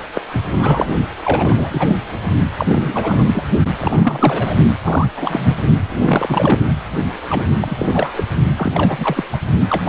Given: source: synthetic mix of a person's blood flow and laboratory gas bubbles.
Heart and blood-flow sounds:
Doppler ultrasound of blood flow; precordium
0.15-0.21 s: bubbles
0.32-0.43 s: bubbles
0.52-0.91 s: bubbles
1.23-1.97 s: bubbles
2.58-3.46 s: bubbles
3.79-4.55 s: bubbles
4.82-5.55 s: bubbles
5.88-6.65 s: bubbles
7.29-7.48 s: bubbles
7.61-8.24 s: bubbles
8.57-9.25 s: bubbles
9.32-9.38 s: bubbles
9.70-9.88 s: bubbles
From the record:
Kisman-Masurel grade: 332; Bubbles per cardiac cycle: rolling drumbeat, 9 or more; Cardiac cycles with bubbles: 50 to 99%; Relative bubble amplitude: moderate (0.250 to 0.450); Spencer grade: 3 (all of the cardiac periods contain showers or single bubble signals, but not dominating or overriding the cardiac motion signals); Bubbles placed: only in the low amplitude regions of the cardiac cycle

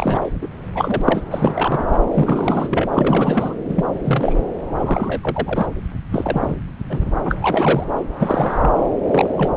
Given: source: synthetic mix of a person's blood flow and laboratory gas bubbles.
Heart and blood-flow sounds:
Doppler ultrasound of blood flow; subclavian vein
0.00-0.32 s: bubbles
0.42-0.47 s: bubbles
0.74-1.01 s: bubbles
1.04-1.23 s: bubbles
1.30-1.84 s: bubbles
1.88-1.96 s: bubbles
2.14-2.88 s: bubbles
2.92-3.54 s: bubbles
3.69-3.85 s: bubbles
4.04-4.43 s: bubbles
4.77-5.21 s: bubbles
5.23-5.68 s: bubbles
6.11-6.56 s: bubbles
6.89-7.11 s: bubbles
7.15-7.19 s: bubbles
7.25-7.35 s: bubbles
7.42-7.84 s: bubbles
8.15-8.71 s: bubbles
9.12-9.29 s: bubbles
9.38-9.52 s: bubbles
From the record:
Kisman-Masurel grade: 343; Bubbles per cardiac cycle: rolling drumbeat, 9 or more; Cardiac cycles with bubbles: 100%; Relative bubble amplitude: loud (0.450 to 0.775); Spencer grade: 3 (all of the cardiac periods contain showers or single bubble signals, but not dominating or overriding the cardiac motion signals); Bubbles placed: anywhere in the cardiac cycle

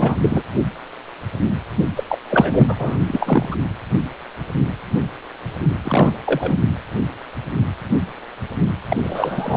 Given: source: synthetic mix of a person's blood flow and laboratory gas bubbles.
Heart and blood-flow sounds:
Doppler ultrasound of blood flow; precordium
0.00-0.17 s: bubbles
0.21-0.43 s: bubbles
1.96-2.04 s: bubbles
2.08-2.18 s: bubbles
2.29-2.76 s: bubbles
2.80-2.98 s: bubbles
3.07-3.56 s: bubbles
5.84-6.17 s: bubbles
6.25-6.58 s: bubbles
8.89-8.97 s: bubbles
9.03-9.57 s: bubbles
From the record:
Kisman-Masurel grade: 333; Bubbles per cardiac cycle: rolling drumbeat, 9 or more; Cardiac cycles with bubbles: 50 to 99%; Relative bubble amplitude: loud (0.450 to 0.775); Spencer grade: 3 (all of the cardiac periods contain showers or single bubble signals, but not dominating or overriding the cardiac motion signals); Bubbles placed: anywhere in the cardiac cycle

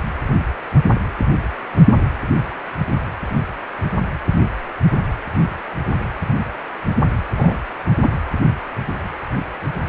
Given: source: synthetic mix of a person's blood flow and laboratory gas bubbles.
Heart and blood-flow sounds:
Doppler ultrasound of blood flow; precordium
7.36-7.58 s: bubbles
8.02-8.10 s: bubbles
From the record:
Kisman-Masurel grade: 122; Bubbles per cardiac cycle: 1 to 2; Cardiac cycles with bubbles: 10 to 50%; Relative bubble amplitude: moderate (0.250 to 0.450); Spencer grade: 2 (many but less than half of the cardiac periods contain bubble signals, singularly or in groups); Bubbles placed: anywhere in the cardiac cycle

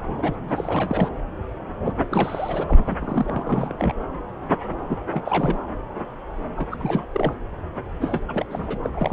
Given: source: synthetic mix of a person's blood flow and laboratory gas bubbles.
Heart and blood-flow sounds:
Doppler ultrasound of blood flow; subclavian vein
0.17-0.38 s: bubbles
0.47-1.08 s: bubbles
1.85-1.92 s: bubbles
2.09-2.94 s: bubbles
3.00-3.95 s: bubbles
4.88-4.98 s: bubbles
5.11-5.58 s: bubbles
6.57-6.77 s: bubbles
6.79-7.05 s: bubbles
7.12-7.34 s: bubbles
8.01-8.22 s: bubbles
8.27-8.46 s: bubbles
8.50-8.79 s: bubbles
8.82-8.90 s: bubbles
8.93-9.13 s: bubbles
From the record:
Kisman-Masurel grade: 332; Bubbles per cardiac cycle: rolling drumbeat, 9 or more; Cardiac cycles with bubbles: 50 to 99%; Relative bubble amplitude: moderate (0.250 to 0.450); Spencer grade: 3 (all of the cardiac periods contain showers or single bubble signals, but not dominating or overriding the cardiac motion signals); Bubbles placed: anywhere in the cardiac cycle

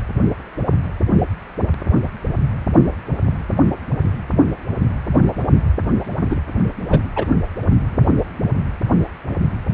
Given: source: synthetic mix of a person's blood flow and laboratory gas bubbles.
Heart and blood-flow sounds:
Doppler ultrasound of blood flow; precordium
6.30-6.35 s: bubbles
6.90-7.00 s: bubbles
7.16-7.25 s: bubbles
From the record:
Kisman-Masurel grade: 213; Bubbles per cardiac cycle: several, 3 to 8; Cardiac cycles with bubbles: 1 to 10%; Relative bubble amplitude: loud (0.450 to 0.775); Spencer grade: 1 (occasional bubble signal discernible with the cardiac motion signal, with majority of cardiac periods free of bubbles); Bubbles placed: anywhere in the cardiac cycle

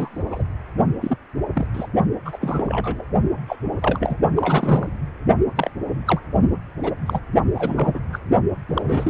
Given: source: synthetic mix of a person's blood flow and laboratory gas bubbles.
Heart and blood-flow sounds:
Doppler ultrasound of blood flow; precordium
0.00-0.22 s: bubbles
0.30-0.42 s: bubbles
1.02-1.18 s: bubbles
1.54-1.67 s: bubbles
1.73-1.87 s: bubbles
2.25-2.38 s: bubbles
2.41-3.04 s: bubbles
3.48-3.56 s: bubbles
3.82-4.17 s: bubbles
4.36-4.92 s: bubbles
5.55-5.71 s: bubbles
6.06-6.19 s: bubbles
6.83-6.92 s: bubbles
7.06-7.19 s: bubbles
7.54-7.99 s: bubbles
8.12-8.19 s: bubbles
8.69-9.10 s: bubbles
From the record:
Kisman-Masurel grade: 242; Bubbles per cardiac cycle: several, 3 to 8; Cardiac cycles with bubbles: 100%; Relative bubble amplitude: moderate (0.250 to 0.450); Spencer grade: 3 (all of the cardiac periods contain showers or single bubble signals, but not dominating or overriding the cardiac motion signals); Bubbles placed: only in the low amplitude regions of the cardiac cycle

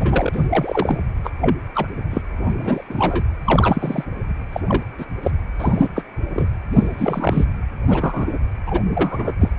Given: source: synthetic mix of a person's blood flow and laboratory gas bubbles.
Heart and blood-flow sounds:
Doppler ultrasound of blood flow; precordium
0.00-1.01 s: bubbles
1.24-1.31 s: bubbles
1.40-1.56 s: bubbles
1.75-1.88 s: bubbles
2.10-2.22 s: bubbles
2.41-2.84 s: bubbles
2.90-3.23 s: bubbles
3.44-4.04 s: bubbles
4.52-4.60 s: bubbles
4.67-4.83 s: bubbles
4.98-5.05 s: bubbles
5.22-5.31 s: bubbles
5.58-5.89 s: bubbles
5.95-6.04 s: bubbles
6.34-6.48 s: bubbles
6.72-7.45 s: bubbles
7.89-8.37 s: bubbles
8.66-8.81 s: bubbles
8.94-9.36 s: bubbles
9.41-9.52 s: bubbles
From the record:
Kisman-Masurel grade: 243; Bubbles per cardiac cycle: several, 3 to 8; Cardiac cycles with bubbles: 100%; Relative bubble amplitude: loud (0.450 to 0.775); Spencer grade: 3 (all of the cardiac periods contain showers or single bubble signals, but not dominating or overriding the cardiac motion signals); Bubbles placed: anywhere in the cardiac cycle

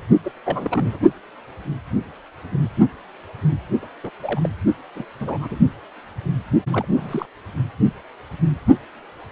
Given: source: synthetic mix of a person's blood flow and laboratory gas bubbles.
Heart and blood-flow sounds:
Doppler ultrasound of blood flow; precordium
0.23-0.32 s: bubbles
0.45-0.99 s: bubbles
3.83-3.87 s: bubbles
4.04-4.10 s: bubbles
4.22-4.50 s: bubbles
4.95-5.05 s: bubbles
5.20-5.59 s: bubbles
6.71-6.85 s: bubbles
6.88-7.25 s: bubbles
From the record:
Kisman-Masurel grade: 221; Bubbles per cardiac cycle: several, 3 to 8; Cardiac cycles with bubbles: 10 to 50%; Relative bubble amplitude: barely perceptible (0.100 to 0.250); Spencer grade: 2 (many but less than half of the cardiac periods contain bubble signals, singularly or in groups); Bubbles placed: only in the low amplitude regions of the cardiac cycle

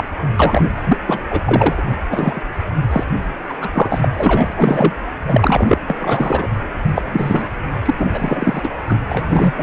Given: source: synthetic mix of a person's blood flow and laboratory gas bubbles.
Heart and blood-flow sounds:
Doppler ultrasound of blood flow; precordium
0.00-0.04 s: bubbles
0.39-0.70 s: bubbles
0.85-0.98 s: bubbles
1.07-1.20 s: bubbles
1.30-1.41 s: bubbles
1.46-1.82 s: bubbles
2.11-2.43 s: bubbles
2.91-3.03 s: bubbles
3.48-3.53 s: bubbles
3.61-3.69 s: bubbles
3.73-4.08 s: bubbles
4.12-4.94 s: bubbles
5.28-5.78 s: bubbles
5.88-6.48 s: bubbles
6.96-7.03 s: bubbles
7.12-7.54 s: bubbles
7.85-7.95 s: bubbles
7.98-8.08 s: bubbles
8.13-8.70 s: bubbles
8.89-8.99 s: bubbles
9.09-9.52 s: bubbles
9.57-9.63 s: bubbles
From the record:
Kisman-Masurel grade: 243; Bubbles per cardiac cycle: several, 3 to 8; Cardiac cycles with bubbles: 100%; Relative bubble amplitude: loud (0.450 to 0.775); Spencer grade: 3 (all of the cardiac periods contain showers or single bubble signals, but not dominating or overriding the cardiac motion signals); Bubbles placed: anywhere in the cardiac cycle

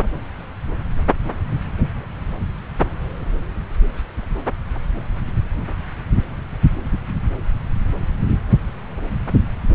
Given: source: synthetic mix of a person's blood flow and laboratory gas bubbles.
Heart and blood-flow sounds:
Doppler ultrasound of blood flow; subclavian vein
no bubbles
From the record:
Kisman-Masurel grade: 000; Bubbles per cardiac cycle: 0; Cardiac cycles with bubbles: 0%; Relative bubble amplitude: no bubbles discernible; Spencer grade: 0 (complete lack of bubble signals)

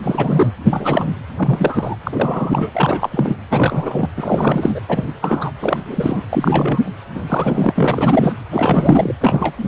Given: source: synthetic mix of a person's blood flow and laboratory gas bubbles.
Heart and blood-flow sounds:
Doppler ultrasound of blood flow; precordium
0.03-0.50 s: bubbles
0.62-1.14 s: bubbles
1.36-1.96 s: bubbles
2.04-2.69 s: bubbles
2.73-3.36 s: bubbles
3.50-4.09 s: bubbles
4.17-4.80 s: bubbles
4.88-5.13 s: bubbles
5.21-5.51 s: bubbles
5.59-6.25 s: bubbles
6.29-6.91 s: bubbles
7.15-7.24 s: bubbles
7.28-7.73 s: bubbles
7.75-8.34 s: bubbles
8.51-9.15 s: bubbles
9.20-9.68 s: bubbles
From the record:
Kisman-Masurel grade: 343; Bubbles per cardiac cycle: rolling drumbeat, 9 or more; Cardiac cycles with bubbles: 100%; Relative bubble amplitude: loud (0.450 to 0.775); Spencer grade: 3 (all of the cardiac periods contain showers or single bubble signals, but not dominating or overriding the cardiac motion signals); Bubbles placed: anywhere in the cardiac cycle

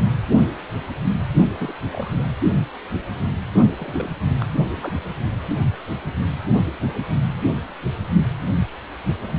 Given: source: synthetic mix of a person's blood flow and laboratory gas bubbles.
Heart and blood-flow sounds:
Doppler ultrasound of blood flow; precordium
1.58-1.73 s: bubbles
1.93-2.10 s: bubbles
2.19-2.23 s: bubbles
3.69-3.73 s: bubbles
3.77-4.09 s: bubbles
4.26-4.46 s: bubbles
4.71-4.96 s: bubbles
From the record:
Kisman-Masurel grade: 221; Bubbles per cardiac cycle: several, 3 to 8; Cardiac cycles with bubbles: 10 to 50%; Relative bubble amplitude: barely perceptible (0.100 to 0.250); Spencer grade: 2 (many but less than half of the cardiac periods contain bubble signals, singularly or in groups); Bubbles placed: only in the low amplitude regions of the cardiac cycle

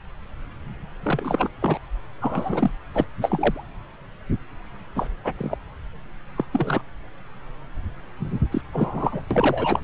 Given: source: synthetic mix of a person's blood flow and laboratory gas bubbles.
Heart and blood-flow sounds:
Doppler ultrasound of blood flow; subclavian vein
1.02-1.49 s: bubbles
1.62-1.78 s: bubbles
2.21-2.71 s: bubbles
2.94-3.04 s: bubbles
3.21-3.65 s: bubbles
4.95-5.07 s: bubbles
5.24-5.33 s: bubbles
5.38-5.56 s: bubbles
6.37-6.45 s: bubbles
6.53-6.82 s: bubbles
8.52-8.61 s: bubbles
8.72-9.21 s: bubbles
9.30-9.80 s: bubbles
From the record:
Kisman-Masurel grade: 232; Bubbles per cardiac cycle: several, 3 to 8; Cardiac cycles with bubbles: 50 to 99%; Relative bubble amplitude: moderate (0.250 to 0.450); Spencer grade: 3 (all of the cardiac periods contain showers or single bubble signals, but not dominating or overriding the cardiac motion signals); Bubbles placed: anywhere in the cardiac cycle

